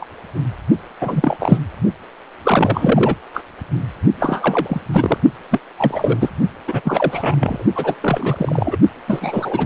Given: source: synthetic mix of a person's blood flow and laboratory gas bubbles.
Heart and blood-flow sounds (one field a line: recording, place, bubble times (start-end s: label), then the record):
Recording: Doppler ultrasound of blood flow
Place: precordium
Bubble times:
0.00-0.07 s: bubbles
1.00-1.37 s: bubbles
1.40-1.58 s: bubbles
2.43-3.15 s: bubbles
3.34-3.44 s: bubbles
4.18-4.80 s: bubbles
4.92-5.17 s: bubbles
5.51-5.59 s: bubbles
5.78-6.29 s: bubbles
6.67-6.81 s: bubbles
6.83-7.36 s: bubbles
7.39-7.63 s: bubbles
7.75-7.95 s: bubbles
8.01-8.78 s: bubbles
9.07-9.66 s: bubbles
From the record:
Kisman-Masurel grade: 343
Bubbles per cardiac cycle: rolling drumbeat, 9 or more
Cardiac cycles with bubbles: 100%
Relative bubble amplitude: loud (0.450 to 0.775)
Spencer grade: 3 (all of the cardiac periods contain showers or single bubble signals, but not dominating or overriding the cardiac motion signals)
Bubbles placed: only in the low amplitude regions of the cardiac cycle